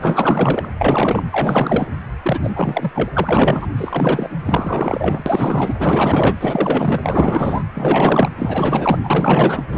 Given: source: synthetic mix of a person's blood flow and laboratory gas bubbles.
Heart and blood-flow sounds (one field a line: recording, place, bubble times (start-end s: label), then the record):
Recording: Doppler ultrasound of blood flow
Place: precordium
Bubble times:
0.00-0.69 s: bubbles
0.79-1.24 s: bubbles
1.30-1.88 s: bubbles
2.23-2.39 s: bubbles
2.44-2.92 s: bubbles
2.94-3.67 s: bubbles
3.77-4.30 s: bubbles
4.45-5.23 s: bubbles
5.26-5.75 s: bubbles
5.79-7.63 s: bubbles
7.75-8.29 s: bubbles
8.38-8.98 s: bubbles
9.03-9.63 s: bubbles
9.71-9.78 s: bubbles
From the record:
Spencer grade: 4 (maximum detectable bubble signal sounding continuously throughout systole and diastole of every cardiac period, and overriding the amplitude of the normal cardiac signals)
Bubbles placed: anywhere in the cardiac cycle